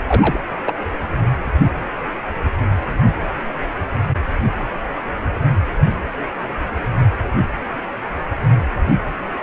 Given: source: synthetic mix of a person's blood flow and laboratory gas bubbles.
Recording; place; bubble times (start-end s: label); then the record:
Doppler ultrasound of blood flow; precordium
0.01-0.41 s: bubbles
0.65-0.74 s: bubbles
From the record:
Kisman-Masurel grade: 122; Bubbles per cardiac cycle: 1 to 2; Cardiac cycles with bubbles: 10 to 50%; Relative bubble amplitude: moderate (0.250 to 0.450); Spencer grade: 2 (many but less than half of the cardiac periods contain bubble signals, singularly or in groups); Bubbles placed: anywhere in the cardiac cycle